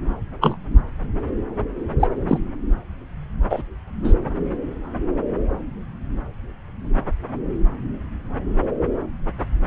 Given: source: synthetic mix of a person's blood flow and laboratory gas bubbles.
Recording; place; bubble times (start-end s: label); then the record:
Doppler ultrasound of blood flow; subclavian vein
0.41-0.57 s: bubbles
2.00-2.08 s: bubbles
2.28-2.40 s: bubbles
3.50-3.62 s: bubbles
4.04-4.13 s: bubbles
From the record:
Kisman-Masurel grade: 123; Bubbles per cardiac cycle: 1 to 2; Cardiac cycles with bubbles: 10 to 50%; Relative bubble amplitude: loud (0.450 to 0.775); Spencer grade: 2 (many but less than half of the cardiac periods contain bubble signals, singularly or in groups); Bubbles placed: anywhere in the cardiac cycle